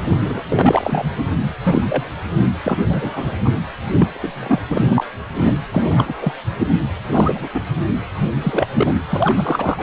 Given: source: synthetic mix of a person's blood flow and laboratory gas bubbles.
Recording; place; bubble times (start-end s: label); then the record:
Doppler ultrasound of blood flow; precordium
0.05-0.17 s: bubbles
0.24-0.41 s: bubbles
0.49-1.06 s: bubbles
1.63-1.82 s: bubbles
1.86-2.09 s: bubbles
2.64-2.77 s: bubbles
2.88-3.37 s: bubbles
3.44-3.52 s: bubbles
3.99-4.06 s: bubbles
4.12-4.61 s: bubbles
4.68-5.04 s: bubbles
5.44-5.60 s: bubbles
5.71-6.15 s: bubbles
6.20-6.32 s: bubbles
6.58-6.68 s: bubbles
7.12-7.49 s: bubbles
7.54-7.61 s: bubbles
8.42-8.66 s: bubbles
8.75-8.96 s: bubbles
9.10-9.82 s: bubbles
From the record:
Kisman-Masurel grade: 243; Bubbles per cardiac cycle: several, 3 to 8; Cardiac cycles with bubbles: 100%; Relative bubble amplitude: loud (0.450 to 0.775); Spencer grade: 3 (all of the cardiac periods contain showers or single bubble signals, but not dominating or overriding the cardiac motion signals); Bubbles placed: anywhere in the cardiac cycle